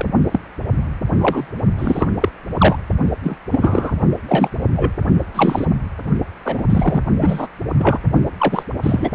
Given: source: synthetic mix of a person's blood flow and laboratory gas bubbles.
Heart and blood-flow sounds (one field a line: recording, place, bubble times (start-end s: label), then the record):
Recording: Doppler ultrasound of blood flow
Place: precordium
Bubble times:
0.00-0.05 s: bubbles
0.31-0.40 s: bubbles
1.17-1.46 s: bubbles
1.78-2.07 s: bubbles
2.21-2.28 s: bubbles
2.57-2.76 s: bubbles
3.23-3.36 s: bubbles
3.51-3.93 s: bubbles
4.28-4.49 s: bubbles
4.75-4.91 s: bubbles
5.34-5.66 s: bubbles
6.45-6.64 s: bubbles
6.70-7.01 s: bubbles
7.18-7.47 s: bubbles
7.78-7.99 s: bubbles
8.38-8.63 s: bubbles
8.83-9.10 s: bubbles
From the record:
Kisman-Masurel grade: 243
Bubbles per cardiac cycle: several, 3 to 8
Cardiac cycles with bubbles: 100%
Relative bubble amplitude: loud (0.450 to 0.775)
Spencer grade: 3 (all of the cardiac periods contain showers or single bubble signals, but not dominating or overriding the cardiac motion signals)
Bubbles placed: only in the low amplitude regions of the cardiac cycle